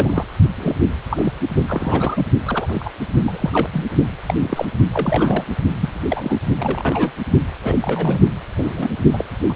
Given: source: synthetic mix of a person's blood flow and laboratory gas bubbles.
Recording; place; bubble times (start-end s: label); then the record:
Doppler ultrasound of blood flow; precordium
0.00-0.25 s: bubbles
0.57-0.75 s: bubbles
1.10-1.32 s: bubbles
1.56-2.25 s: bubbles
2.46-2.91 s: bubbles
3.21-3.68 s: bubbles
3.73-3.86 s: bubbles
4.27-4.34 s: bubbles
4.42-4.65 s: bubbles
4.92-5.44 s: bubbles
5.76-6.00 s: bubbles
6.08-6.40 s: bubbles
6.58-7.12 s: bubbles
7.64-7.79 s: bubbles
7.81-8.21 s: bubbles
8.58-8.89 s: bubbles
9.13-9.25 s: bubbles
9.49-9.56 s: bubbles
From the record:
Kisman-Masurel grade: 242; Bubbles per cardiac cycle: several, 3 to 8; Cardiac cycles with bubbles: 100%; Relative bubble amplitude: moderate (0.250 to 0.450); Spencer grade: 3 (all of the cardiac periods contain showers or single bubble signals, but not dominating or overriding the cardiac motion signals); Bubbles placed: only in the low amplitude regions of the cardiac cycle